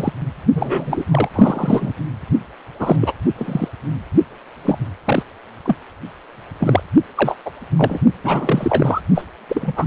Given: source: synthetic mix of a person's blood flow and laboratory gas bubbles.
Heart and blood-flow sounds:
Doppler ultrasound of blood flow; precordium
0.00-0.12 s: bubbles
0.54-1.03 s: bubbles
1.10-1.29 s: bubbles
1.34-1.93 s: bubbles
2.79-3.14 s: bubbles
3.35-3.69 s: bubbles
4.65-4.79 s: bubbles
5.04-5.23 s: bubbles
5.65-5.76 s: bubbles
6.58-6.82 s: bubbles
7.15-7.37 s: bubbles
7.45-7.50 s: bubbles
7.77-7.97 s: bubbles
8.23-9.01 s: bubbles
9.15-9.25 s: bubbles
9.48-9.86 s: bubbles
From the record:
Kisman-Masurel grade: 243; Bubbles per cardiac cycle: several, 3 to 8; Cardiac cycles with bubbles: 100%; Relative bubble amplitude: loud (0.450 to 0.775); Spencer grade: 3 (all of the cardiac periods contain showers or single bubble signals, but not dominating or overriding the cardiac motion signals); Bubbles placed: anywhere in the cardiac cycle

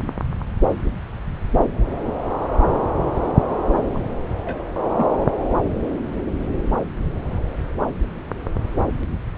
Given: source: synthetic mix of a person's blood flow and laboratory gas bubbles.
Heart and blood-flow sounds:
Doppler ultrasound of blood flow; subclavian vein
3.94-4.00 s: bubbles
4.33-4.63 s: bubbles
4.96-5.06 s: bubbles
From the record:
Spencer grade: 1 (occasional bubble signal discernible with the cardiac motion signal, with majority of cardiac periods free of bubbles); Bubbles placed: anywhere in the cardiac cycle

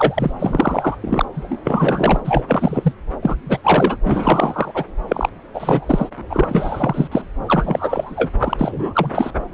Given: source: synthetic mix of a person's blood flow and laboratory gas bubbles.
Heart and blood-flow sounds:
Doppler ultrasound of blood flow; subclavian vein
0.00-0.31 s: bubbles
0.40-0.96 s: bubbles
1.01-1.25 s: bubbles
1.34-1.61 s: bubbles
1.64-2.20 s: bubbles
2.25-2.92 s: bubbles
3.22-3.37 s: bubbles
3.45-3.96 s: bubbles
4.04-4.85 s: bubbles
5.08-5.29 s: bubbles
5.54-6.09 s: bubbles
6.29-7.08 s: bubbles
7.12-7.22 s: bubbles
7.46-8.29 s: bubbles
8.40-9.30 s: bubbles
From the record:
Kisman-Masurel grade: 343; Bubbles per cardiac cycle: rolling drumbeat, 9 or more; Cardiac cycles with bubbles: 100%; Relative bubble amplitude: loud (0.450 to 0.775); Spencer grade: 3 (all of the cardiac periods contain showers or single bubble signals, but not dominating or overriding the cardiac motion signals); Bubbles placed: anywhere in the cardiac cycle

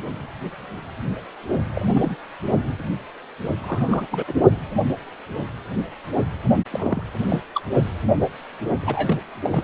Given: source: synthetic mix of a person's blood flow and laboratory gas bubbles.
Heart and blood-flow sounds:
Doppler ultrasound of blood flow; precordium
1.73-2.16 s: bubbles
3.60-4.07 s: bubbles
4.11-4.24 s: bubbles
4.27-4.33 s: bubbles
6.71-7.03 s: bubbles
7.29-7.42 s: bubbles
7.54-7.62 s: bubbles
8.82-9.18 s: bubbles
9.44-9.64 s: bubbles
From the record:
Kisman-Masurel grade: 221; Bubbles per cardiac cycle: several, 3 to 8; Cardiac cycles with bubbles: 10 to 50%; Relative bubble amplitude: barely perceptible (0.100 to 0.250); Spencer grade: 2 (many but less than half of the cardiac periods contain bubble signals, singularly or in groups); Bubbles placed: only in the low amplitude regions of the cardiac cycle

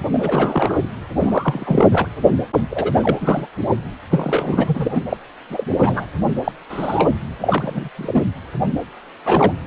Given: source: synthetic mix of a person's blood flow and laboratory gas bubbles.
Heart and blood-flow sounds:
Doppler ultrasound of blood flow; precordium
0.11-0.78 s: bubbles
1.17-2.07 s: bubbles
2.69-3.48 s: bubbles
4.09-5.02 s: bubbles
5.09-5.17 s: bubbles
5.49-6.05 s: bubbles
6.44-6.52 s: bubbles
6.69-7.10 s: bubbles
7.41-7.89 s: bubbles
7.96-8.22 s: bubbles
9.25-9.53 s: bubbles
From the record:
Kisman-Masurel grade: 243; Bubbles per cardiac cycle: several, 3 to 8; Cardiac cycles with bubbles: 100%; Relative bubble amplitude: loud (0.450 to 0.775); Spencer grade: 3 (all of the cardiac periods contain showers or single bubble signals, but not dominating or overriding the cardiac motion signals); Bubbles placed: anywhere in the cardiac cycle

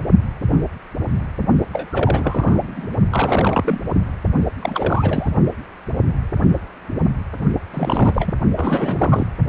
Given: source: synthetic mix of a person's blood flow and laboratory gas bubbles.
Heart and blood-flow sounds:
Doppler ultrasound of blood flow; precordium
1.71-2.88 s: bubbles
3.10-3.80 s: bubbles
3.93-4.01 s: bubbles
4.62-5.30 s: bubbles
7.74-8.34 s: bubbles
8.56-9.27 s: bubbles
From the record:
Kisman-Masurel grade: 332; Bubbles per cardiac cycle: rolling drumbeat, 9 or more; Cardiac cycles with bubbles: 50 to 99%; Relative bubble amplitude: moderate (0.250 to 0.450); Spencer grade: 3 (all of the cardiac periods contain showers or single bubble signals, but not dominating or overriding the cardiac motion signals); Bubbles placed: only in the low amplitude regions of the cardiac cycle

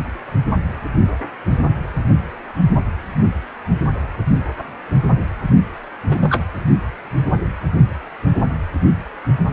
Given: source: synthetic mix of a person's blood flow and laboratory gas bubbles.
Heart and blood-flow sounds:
Doppler ultrasound of blood flow; precordium
6.10-6.45 s: bubbles
From the record:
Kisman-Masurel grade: 212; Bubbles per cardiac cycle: several, 3 to 8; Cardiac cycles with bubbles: 1 to 10%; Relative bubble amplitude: moderate (0.250 to 0.450); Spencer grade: 1 (occasional bubble signal discernible with the cardiac motion signal, with majority of cardiac periods free of bubbles); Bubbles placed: anywhere in the cardiac cycle

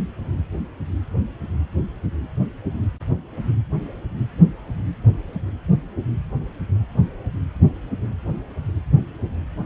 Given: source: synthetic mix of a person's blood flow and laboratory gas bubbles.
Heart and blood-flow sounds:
Doppler ultrasound of blood flow; precordium
no bubbles
From the record:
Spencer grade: 0 (complete lack of bubble signals)

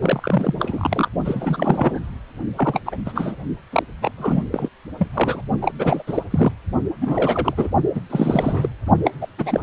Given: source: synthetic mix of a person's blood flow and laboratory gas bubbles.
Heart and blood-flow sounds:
Doppler ultrasound of blood flow; precordium
0.02-0.54 s: bubbles
0.59-1.08 s: bubbles
1.24-2.00 s: bubbles
2.56-2.80 s: bubbles
2.85-2.97 s: bubbles
3.05-3.35 s: bubbles
3.72-3.83 s: bubbles
4.01-4.12 s: bubbles
4.18-4.43 s: bubbles
4.52-4.69 s: bubbles
4.97-5.08 s: bubbles
5.13-5.42 s: bubbles
5.62-5.72 s: bubbles
5.79-6.03 s: bubbles
6.07-6.22 s: bubbles
6.30-6.52 s: bubbles
7.00-7.70 s: bubbles
7.94-8.01 s: bubbles
8.09-8.69 s: bubbles
9.04-9.11 s: bubbles
9.21-9.27 s: bubbles
9.38-9.60 s: bubbles
From the record:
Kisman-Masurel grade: 342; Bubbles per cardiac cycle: rolling drumbeat, 9 or more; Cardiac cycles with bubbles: 100%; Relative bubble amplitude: moderate (0.250 to 0.450); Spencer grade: 3 (all of the cardiac periods contain showers or single bubble signals, but not dominating or overriding the cardiac motion signals); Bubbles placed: only in the low amplitude regions of the cardiac cycle

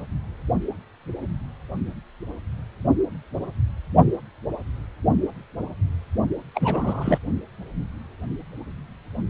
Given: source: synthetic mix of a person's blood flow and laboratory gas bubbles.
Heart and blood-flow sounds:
Doppler ultrasound of blood flow; precordium
6.54-7.18 s: bubbles
From the record:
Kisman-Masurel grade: 222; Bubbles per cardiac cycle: several, 3 to 8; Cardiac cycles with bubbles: 10 to 50%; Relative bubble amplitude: moderate (0.250 to 0.450); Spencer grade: 2 (many but less than half of the cardiac periods contain bubble signals, singularly or in groups); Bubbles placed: only in the low amplitude regions of the cardiac cycle

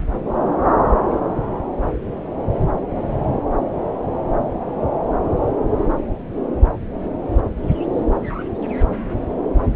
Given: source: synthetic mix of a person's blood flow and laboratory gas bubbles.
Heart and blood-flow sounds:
Doppler ultrasound of blood flow; subclavian vein
no bubbles
From the record:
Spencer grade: 0 (complete lack of bubble signals)

